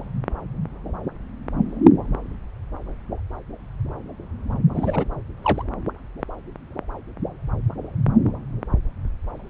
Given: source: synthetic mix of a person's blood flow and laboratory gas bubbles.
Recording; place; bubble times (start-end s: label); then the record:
Doppler ultrasound of blood flow; subclavian vein
4.74-5.04 s: bubbles
5.42-5.63 s: bubbles
From the record:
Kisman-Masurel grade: 212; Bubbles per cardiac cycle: several, 3 to 8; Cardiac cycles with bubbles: 1 to 10%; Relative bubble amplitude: moderate (0.250 to 0.450); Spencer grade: 1 (occasional bubble signal discernible with the cardiac motion signal, with majority of cardiac periods free of bubbles); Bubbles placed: anywhere in the cardiac cycle